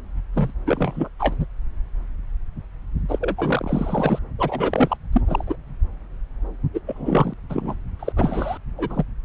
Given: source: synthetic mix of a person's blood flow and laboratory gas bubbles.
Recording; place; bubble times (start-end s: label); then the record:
Doppler ultrasound of blood flow; subclavian vein
0.34-0.52 s: bubbles
0.66-1.09 s: bubbles
1.19-1.35 s: bubbles
1.40-1.46 s: bubbles
3.08-4.19 s: bubbles
4.38-4.97 s: bubbles
5.12-5.21 s: bubbles
5.27-5.56 s: bubbles
6.74-6.79 s: bubbles
6.87-7.33 s: bubbles
7.49-7.75 s: bubbles
7.99-8.12 s: bubbles
8.16-8.57 s: bubbles
8.78-9.04 s: bubbles
From the record:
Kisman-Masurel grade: 332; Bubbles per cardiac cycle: rolling drumbeat, 9 or more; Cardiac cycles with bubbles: 50 to 99%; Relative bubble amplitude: moderate (0.250 to 0.450); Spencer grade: 3 (all of the cardiac periods contain showers or single bubble signals, but not dominating or overriding the cardiac motion signals); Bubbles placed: anywhere in the cardiac cycle